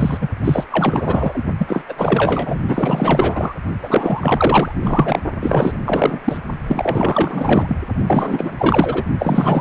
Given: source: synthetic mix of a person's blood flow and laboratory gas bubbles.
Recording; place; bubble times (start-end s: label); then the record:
Doppler ultrasound of blood flow; precordium
0.00-0.18 s: bubbles
0.21-0.29 s: bubbles
0.44-0.64 s: bubbles
0.71-1.45 s: bubbles
1.58-1.82 s: bubbles
1.89-1.94 s: bubbles
1.97-2.59 s: bubbles
2.67-3.54 s: bubbles
3.83-4.73 s: bubbles
4.82-5.20 s: bubbles
5.41-5.79 s: bubbles
5.85-6.19 s: bubbles
6.25-6.40 s: bubbles
6.67-7.77 s: bubbles
8.07-8.53 s: bubbles
8.58-9.04 s: bubbles
9.19-9.61 s: bubbles
From the record:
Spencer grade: 4 (maximum detectable bubble signal sounding continuously throughout systole and diastole of every cardiac period, and overriding the amplitude of the normal cardiac signals); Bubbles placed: only in the low amplitude regions of the cardiac cycle